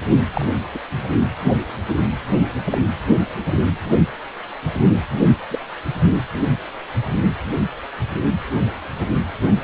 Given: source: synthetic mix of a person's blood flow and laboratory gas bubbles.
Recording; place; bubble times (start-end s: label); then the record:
Doppler ultrasound of blood flow; precordium
0.34-0.45 s: bubbles
0.74-0.79 s: bubbles
2.72-2.77 s: bubbles
5.50-5.59 s: bubbles
From the record:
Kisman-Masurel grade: 122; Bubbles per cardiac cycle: 1 to 2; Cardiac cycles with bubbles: 10 to 50%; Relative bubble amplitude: moderate (0.250 to 0.450); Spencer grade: 2 (many but less than half of the cardiac periods contain bubble signals, singularly or in groups); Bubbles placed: anywhere in the cardiac cycle